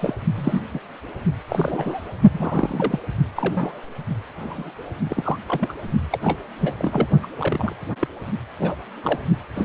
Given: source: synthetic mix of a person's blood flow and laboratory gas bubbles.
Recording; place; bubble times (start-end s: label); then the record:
Doppler ultrasound of blood flow; precordium
0.00-0.14 s: bubbles
0.36-0.61 s: bubbles
0.73-0.80 s: bubbles
1.48-2.08 s: bubbles
2.33-2.99 s: bubbles
3.36-3.79 s: bubbles
4.39-4.71 s: bubbles
5.03-5.38 s: bubbles
5.47-5.72 s: bubbles
6.12-6.18 s: bubbles
6.21-6.39 s: bubbles
6.59-6.73 s: bubbles
6.78-7.07 s: bubbles
7.22-7.27 s: bubbles
7.38-7.72 s: bubbles
8.01-8.08 s: bubbles
8.59-8.76 s: bubbles
9.03-9.19 s: bubbles
9.55-9.65 s: bubbles
From the record:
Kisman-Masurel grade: 242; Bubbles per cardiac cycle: several, 3 to 8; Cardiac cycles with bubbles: 100%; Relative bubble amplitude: moderate (0.250 to 0.450); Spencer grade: 3 (all of the cardiac periods contain showers or single bubble signals, but not dominating or overriding the cardiac motion signals); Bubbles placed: only in the low amplitude regions of the cardiac cycle